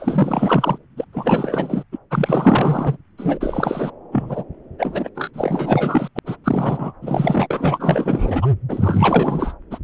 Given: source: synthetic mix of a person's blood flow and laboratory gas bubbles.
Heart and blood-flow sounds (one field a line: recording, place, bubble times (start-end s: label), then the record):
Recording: Doppler ultrasound of blood flow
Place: subclavian vein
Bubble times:
0.00-0.78 s: bubbles
0.96-1.04 s: bubbles
1.12-1.83 s: bubbles
1.92-1.98 s: bubbles
2.11-2.97 s: bubbles
3.18-3.92 s: bubbles
4.12-4.44 s: bubbles
4.79-5.09 s: bubbles
5.15-6.09 s: bubbles
6.15-6.19 s: bubbles
6.26-6.37 s: bubbles
6.44-6.92 s: bubbles
7.02-7.47 s: bubbles
7.50-8.47 s: bubbles
8.69-9.54 s: bubbles
9.71-9.79 s: bubbles
From the record:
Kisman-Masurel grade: 444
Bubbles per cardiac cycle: continuous sound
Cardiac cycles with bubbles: 100%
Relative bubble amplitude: maximal (0.775 to 0.999)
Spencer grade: 4 (maximum detectable bubble signal sounding continuously throughout systole and diastole of every cardiac period, and overriding the amplitude of the normal cardiac signals)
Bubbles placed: anywhere in the cardiac cycle